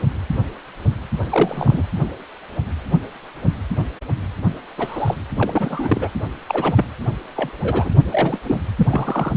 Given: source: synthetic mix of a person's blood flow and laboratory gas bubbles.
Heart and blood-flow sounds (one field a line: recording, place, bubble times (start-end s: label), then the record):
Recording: Doppler ultrasound of blood flow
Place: precordium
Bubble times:
1.30-1.82 s: bubbles
4.77-5.15 s: bubbles
5.33-6.09 s: bubbles
6.47-6.85 s: bubbles
7.35-7.51 s: bubbles
7.63-7.90 s: bubbles
8.11-8.39 s: bubbles
8.43-8.59 s: bubbles
8.78-8.88 s: bubbles
8.91-9.37 s: bubbles
From the record:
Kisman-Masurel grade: 232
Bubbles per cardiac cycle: several, 3 to 8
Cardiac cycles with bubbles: 50 to 99%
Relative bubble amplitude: moderate (0.250 to 0.450)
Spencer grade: 3 (all of the cardiac periods contain showers or single bubble signals, but not dominating or overriding the cardiac motion signals)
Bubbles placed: anywhere in the cardiac cycle